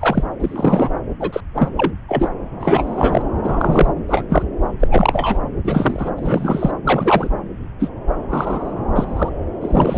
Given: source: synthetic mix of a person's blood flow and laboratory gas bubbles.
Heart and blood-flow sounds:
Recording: Doppler ultrasound of blood flow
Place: subclavian vein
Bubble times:
0.00-0.23 s: bubbles
0.40-0.92 s: bubbles
1.20-1.41 s: bubbles
1.55-1.69 s: bubbles
1.76-1.92 s: bubbles
2.08-2.31 s: bubbles
2.60-3.22 s: bubbles
3.43-3.93 s: bubbles
4.08-4.25 s: bubbles
4.29-4.44 s: bubbles
4.79-4.88 s: bubbles
4.91-5.38 s: bubbles
5.64-6.10 s: bubbles
6.16-6.71 s: bubbles
6.85-7.30 s: bubbles
7.79-7.89 s: bubbles
8.29-8.73 s: bubbles
8.96-9.29 s: bubbles
9.61-9.98 s: bubbles
From the record:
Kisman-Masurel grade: 243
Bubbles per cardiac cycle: several, 3 to 8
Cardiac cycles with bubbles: 100%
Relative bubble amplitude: loud (0.450 to 0.775)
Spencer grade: 3 (all of the cardiac periods contain showers or single bubble signals, but not dominating or overriding the cardiac motion signals)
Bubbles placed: anywhere in the cardiac cycle

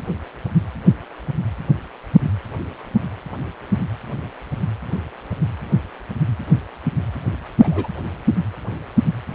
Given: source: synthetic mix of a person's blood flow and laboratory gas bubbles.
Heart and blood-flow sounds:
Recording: Doppler ultrasound of blood flow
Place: precordium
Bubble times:
7.60-7.89 s: bubbles
From the record:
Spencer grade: 2 (many but less than half of the cardiac periods contain bubble signals, singularly or in groups)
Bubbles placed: anywhere in the cardiac cycle

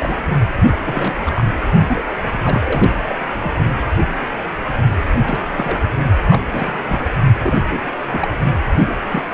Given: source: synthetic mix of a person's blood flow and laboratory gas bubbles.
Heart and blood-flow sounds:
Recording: Doppler ultrasound of blood flow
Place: precordium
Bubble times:
0.00-0.21 s: bubbles
0.71-0.75 s: bubbles
0.84-1.43 s: bubbles
1.88-2.02 s: bubbles
2.06-2.15 s: bubbles
2.29-2.93 s: bubbles
3.08-3.19 s: bubbles
3.40-3.51 s: bubbles
5.12-5.19 s: bubbles
5.25-5.79 s: bubbles
6.29-6.43 s: bubbles
6.49-6.79 s: bubbles
6.86-7.05 s: bubbles
7.43-7.83 s: bubbles
8.02-8.32 s: bubbles
8.81-8.97 s: bubbles
9.12-9.22 s: bubbles
From the record:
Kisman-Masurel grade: 232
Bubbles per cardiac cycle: several, 3 to 8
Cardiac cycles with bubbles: 50 to 99%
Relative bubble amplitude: moderate (0.250 to 0.450)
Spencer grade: 3 (all of the cardiac periods contain showers or single bubble signals, but not dominating or overriding the cardiac motion signals)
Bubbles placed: only in the low amplitude regions of the cardiac cycle

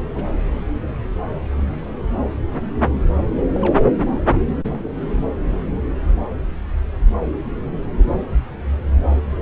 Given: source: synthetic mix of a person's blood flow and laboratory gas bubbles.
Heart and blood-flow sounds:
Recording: Doppler ultrasound of blood flow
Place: subclavian vein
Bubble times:
0.11-0.23 s: bubbles
3.55-3.80 s: bubbles
4.69-4.91 s: bubbles
From the record:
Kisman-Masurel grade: 121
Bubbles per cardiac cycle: 1 to 2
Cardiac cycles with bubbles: 10 to 50%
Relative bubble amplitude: barely perceptible (0.100 to 0.250)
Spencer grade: 2 (many but less than half of the cardiac periods contain bubble signals, singularly or in groups)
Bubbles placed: anywhere in the cardiac cycle

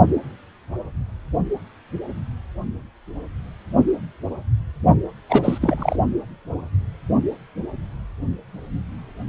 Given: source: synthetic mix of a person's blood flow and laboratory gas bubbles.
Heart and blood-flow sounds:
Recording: Doppler ultrasound of blood flow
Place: precordium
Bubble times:
5.29-5.58 s: bubbles
5.61-5.96 s: bubbles
From the record:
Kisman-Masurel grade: 213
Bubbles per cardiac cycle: several, 3 to 8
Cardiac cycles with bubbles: 1 to 10%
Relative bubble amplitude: loud (0.450 to 0.775)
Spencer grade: 1 (occasional bubble signal discernible with the cardiac motion signal, with majority of cardiac periods free of bubbles)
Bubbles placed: only in the low amplitude regions of the cardiac cycle

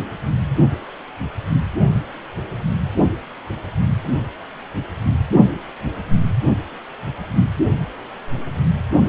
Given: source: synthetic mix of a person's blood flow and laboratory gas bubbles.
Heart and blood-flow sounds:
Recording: Doppler ultrasound of blood flow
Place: precordium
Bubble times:
no bubbles
From the record:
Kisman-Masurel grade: 000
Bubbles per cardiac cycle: 0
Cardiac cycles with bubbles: 0%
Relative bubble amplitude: no bubbles discernible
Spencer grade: 0 (complete lack of bubble signals)

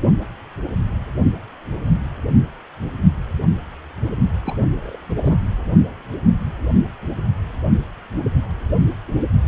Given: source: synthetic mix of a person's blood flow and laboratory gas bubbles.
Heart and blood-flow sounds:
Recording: Doppler ultrasound of blood flow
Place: precordium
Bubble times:
4.46-4.64 s: bubbles
4.67-4.76 s: bubbles
4.80-4.97 s: bubbles
5.10-5.37 s: bubbles
From the record:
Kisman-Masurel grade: 211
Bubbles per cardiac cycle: several, 3 to 8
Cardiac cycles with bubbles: 1 to 10%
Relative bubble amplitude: barely perceptible (0.100 to 0.250)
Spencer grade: 1 (occasional bubble signal discernible with the cardiac motion signal, with majority of cardiac periods free of bubbles)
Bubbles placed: anywhere in the cardiac cycle

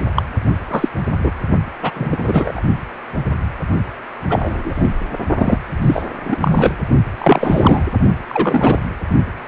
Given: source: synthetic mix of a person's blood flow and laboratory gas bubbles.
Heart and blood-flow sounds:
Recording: Doppler ultrasound of blood flow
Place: precordium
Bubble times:
0.15-0.23 s: bubbles
0.70-0.89 s: bubbles
1.18-1.30 s: bubbles
1.82-2.62 s: bubbles
4.29-4.90 s: bubbles
5.37-5.58 s: bubbles
5.81-6.02 s: bubbles
6.24-6.37 s: bubbles
6.41-6.75 s: bubbles
7.18-7.83 s: bubbles
8.29-8.79 s: bubbles
From the record:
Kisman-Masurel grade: 233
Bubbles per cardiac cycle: several, 3 to 8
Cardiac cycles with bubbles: 50 to 99%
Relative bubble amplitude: loud (0.450 to 0.775)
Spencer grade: 3 (all of the cardiac periods contain showers or single bubble signals, but not dominating or overriding the cardiac motion signals)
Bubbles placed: only in the low amplitude regions of the cardiac cycle

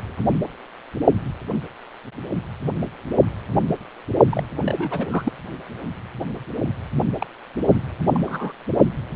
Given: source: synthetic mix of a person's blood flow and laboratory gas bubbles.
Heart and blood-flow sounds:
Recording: Doppler ultrasound of blood flow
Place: precordium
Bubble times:
4.29-4.43 s: bubbles
4.64-5.06 s: bubbles
5.12-5.32 s: bubbles
7.19-7.26 s: bubbles
7.68-7.73 s: bubbles
8.08-8.52 s: bubbles
From the record:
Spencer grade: 2 (many but less than half of the cardiac periods contain bubble signals, singularly or in groups)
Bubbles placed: only in the low amplitude regions of the cardiac cycle

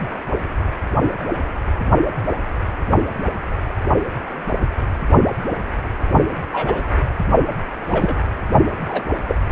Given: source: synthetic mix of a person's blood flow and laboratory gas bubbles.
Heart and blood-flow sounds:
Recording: Doppler ultrasound of blood flow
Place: precordium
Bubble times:
6.52-6.85 s: bubbles
7.88-8.17 s: bubbles
8.85-9.02 s: bubbles
9.28-9.36 s: bubbles
From the record:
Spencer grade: 2 (many but less than half of the cardiac periods contain bubble signals, singularly or in groups)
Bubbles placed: only in the low amplitude regions of the cardiac cycle

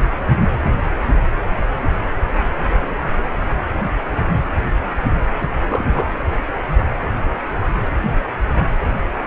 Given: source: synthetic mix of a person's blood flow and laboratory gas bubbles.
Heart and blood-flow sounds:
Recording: Doppler ultrasound of blood flow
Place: precordium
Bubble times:
5.39-5.48 s: bubbles
5.68-6.12 s: bubbles
From the record:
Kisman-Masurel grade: 222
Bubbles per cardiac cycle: several, 3 to 8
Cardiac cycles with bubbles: 10 to 50%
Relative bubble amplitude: moderate (0.250 to 0.450)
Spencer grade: 2 (many but less than half of the cardiac periods contain bubble signals, singularly or in groups)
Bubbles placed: anywhere in the cardiac cycle

